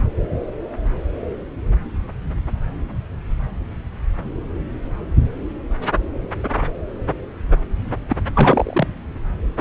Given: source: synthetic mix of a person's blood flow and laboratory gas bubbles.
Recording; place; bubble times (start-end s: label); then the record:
Doppler ultrasound of blood flow; subclavian vein
8.08-8.16 s: bubbles
8.35-8.88 s: bubbles
From the record:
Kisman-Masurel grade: 212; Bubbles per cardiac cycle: several, 3 to 8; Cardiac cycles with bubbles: 1 to 10%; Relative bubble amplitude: moderate (0.250 to 0.450); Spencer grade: 1 (occasional bubble signal discernible with the cardiac motion signal, with majority of cardiac periods free of bubbles); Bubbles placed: anywhere in the cardiac cycle